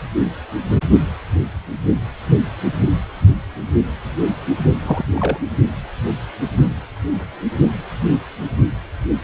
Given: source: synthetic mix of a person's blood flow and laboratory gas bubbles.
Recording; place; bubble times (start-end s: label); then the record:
Doppler ultrasound of blood flow; precordium
4.83-5.05 s: bubbles
5.15-5.38 s: bubbles
From the record:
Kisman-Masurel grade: 222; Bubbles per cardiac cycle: several, 3 to 8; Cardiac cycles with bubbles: 10 to 50%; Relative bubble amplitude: moderate (0.250 to 0.450); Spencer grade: 2 (many but less than half of the cardiac periods contain bubble signals, singularly or in groups); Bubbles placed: only in the low amplitude regions of the cardiac cycle